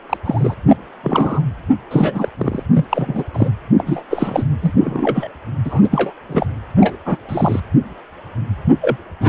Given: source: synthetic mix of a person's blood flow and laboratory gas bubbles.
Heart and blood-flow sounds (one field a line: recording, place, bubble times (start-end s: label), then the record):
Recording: Doppler ultrasound of blood flow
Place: precordium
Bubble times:
0.09-0.17 s: bubbles
0.25-0.54 s: bubbles
0.68-0.77 s: bubbles
1.03-1.42 s: bubbles
1.91-2.29 s: bubbles
2.38-2.63 s: bubbles
2.75-2.85 s: bubbles
2.89-3.24 s: bubbles
3.33-3.49 s: bubbles
3.77-4.02 s: bubbles
4.10-4.44 s: bubbles
4.61-4.72 s: bubbles
4.77-5.28 s: bubbles
5.64-5.88 s: bubbles
5.91-6.13 s: bubbles
6.29-6.46 s: bubbles
6.79-6.96 s: bubbles
7.05-7.17 s: bubbles
7.28-7.60 s: bubbles
8.81-8.96 s: bubbles
9.21-9.29 s: bubbles
From the record:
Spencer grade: 3 (all of the cardiac periods contain showers or single bubble signals, but not dominating or overriding the cardiac motion signals)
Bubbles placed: anywhere in the cardiac cycle